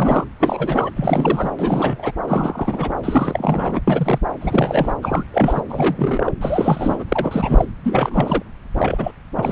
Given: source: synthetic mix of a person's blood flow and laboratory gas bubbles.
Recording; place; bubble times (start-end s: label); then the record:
Doppler ultrasound of blood flow; subclavian vein
0.00-0.24 s: bubbles
0.39-0.91 s: bubbles
0.96-1.51 s: bubbles
1.58-2.11 s: bubbles
2.24-2.93 s: bubbles
3.03-3.81 s: bubbles
3.87-4.19 s: bubbles
4.41-4.95 s: bubbles
5.02-5.24 s: bubbles
5.32-5.61 s: bubbles
5.69-6.32 s: bubbles
6.41-7.04 s: bubbles
7.08-7.66 s: bubbles
7.84-8.43 s: bubbles
8.74-9.12 s: bubbles
9.38-9.52 s: bubbles
From the record:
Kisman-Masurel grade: 342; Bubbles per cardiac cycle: rolling drumbeat, 9 or more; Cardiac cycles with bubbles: 100%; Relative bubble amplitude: moderate (0.250 to 0.450); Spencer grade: 3 (all of the cardiac periods contain showers or single bubble signals, but not dominating or overriding the cardiac motion signals); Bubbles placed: anywhere in the cardiac cycle